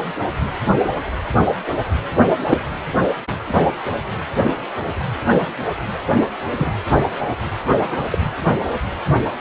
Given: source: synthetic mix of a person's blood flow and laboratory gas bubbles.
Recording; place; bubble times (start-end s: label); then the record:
Doppler ultrasound of blood flow; precordium
2.49-2.58 s: bubbles
6.56-6.70 s: bubbles
7.80-7.98 s: bubbles
8.10-8.18 s: bubbles
From the record:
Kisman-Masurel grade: 122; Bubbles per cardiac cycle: 1 to 2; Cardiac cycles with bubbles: 10 to 50%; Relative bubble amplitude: moderate (0.250 to 0.450); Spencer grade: 2 (many but less than half of the cardiac periods contain bubble signals, singularly or in groups); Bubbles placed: anywhere in the cardiac cycle